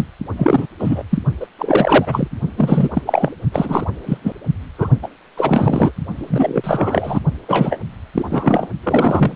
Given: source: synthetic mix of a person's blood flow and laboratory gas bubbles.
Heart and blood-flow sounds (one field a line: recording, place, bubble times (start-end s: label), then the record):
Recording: Doppler ultrasound of blood flow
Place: precordium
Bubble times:
0.00-0.08 s: bubbles
0.36-0.67 s: bubbles
0.79-1.03 s: bubbles
1.10-1.19 s: bubbles
1.40-1.46 s: bubbles
1.58-2.28 s: bubbles
2.57-2.89 s: bubbles
2.93-3.02 s: bubbles
3.05-3.32 s: bubbles
3.52-3.85 s: bubbles
4.06-4.18 s: bubbles
4.24-4.33 s: bubbles
4.78-4.89 s: bubbles
5.03-5.08 s: bubbles
5.37-5.92 s: bubbles
6.16-7.20 s: bubbles
7.48-7.81 s: bubbles
8.14-8.68 s: bubbles
8.83-9.35 s: bubbles
From the record:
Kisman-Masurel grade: 333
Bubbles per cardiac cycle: rolling drumbeat, 9 or more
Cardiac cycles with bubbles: 50 to 99%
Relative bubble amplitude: loud (0.450 to 0.775)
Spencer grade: 3 (all of the cardiac periods contain showers or single bubble signals, but not dominating or overriding the cardiac motion signals)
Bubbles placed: only in the low amplitude regions of the cardiac cycle